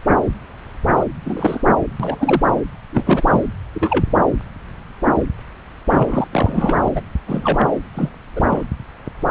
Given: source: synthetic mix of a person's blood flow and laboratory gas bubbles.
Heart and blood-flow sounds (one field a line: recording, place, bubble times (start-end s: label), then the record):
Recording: Doppler ultrasound of blood flow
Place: subclavian vein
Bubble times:
0.92-1.04 s: bubbles
1.23-1.61 s: bubbles
1.99-2.42 s: bubbles
2.89-3.41 s: bubbles
3.74-4.04 s: bubbles
5.87-6.28 s: bubbles
6.32-6.89 s: bubbles
6.95-7.02 s: bubbles
7.27-7.69 s: bubbles
7.94-8.09 s: bubbles
8.35-8.41 s: bubbles
8.47-8.62 s: bubbles
From the record:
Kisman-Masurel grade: 232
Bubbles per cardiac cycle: several, 3 to 8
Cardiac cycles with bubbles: 50 to 99%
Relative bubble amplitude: moderate (0.250 to 0.450)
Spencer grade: 3 (all of the cardiac periods contain showers or single bubble signals, but not dominating or overriding the cardiac motion signals)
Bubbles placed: anywhere in the cardiac cycle